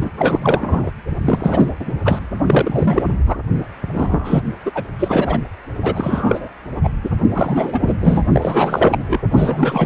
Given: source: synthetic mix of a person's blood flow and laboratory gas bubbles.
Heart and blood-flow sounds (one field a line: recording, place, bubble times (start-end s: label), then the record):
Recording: Doppler ultrasound of blood flow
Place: precordium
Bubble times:
0.01-0.10 s: bubbles
0.17-0.90 s: bubbles
1.25-1.71 s: bubbles
1.79-1.93 s: bubbles
2.04-2.19 s: bubbles
2.50-3.07 s: bubbles
3.26-3.37 s: bubbles
3.94-4.42 s: bubbles
4.65-4.71 s: bubbles
4.75-4.83 s: bubbles
4.99-5.40 s: bubbles
5.82-6.49 s: bubbles
6.83-6.90 s: bubbles
7.04-7.09 s: bubbles
7.33-7.95 s: bubbles
8.00-8.23 s: bubbles
8.31-9.21 s: bubbles
9.31-9.86 s: bubbles
From the record:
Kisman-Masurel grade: 343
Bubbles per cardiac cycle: rolling drumbeat, 9 or more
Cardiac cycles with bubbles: 100%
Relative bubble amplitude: loud (0.450 to 0.775)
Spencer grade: 3 (all of the cardiac periods contain showers or single bubble signals, but not dominating or overriding the cardiac motion signals)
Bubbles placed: anywhere in the cardiac cycle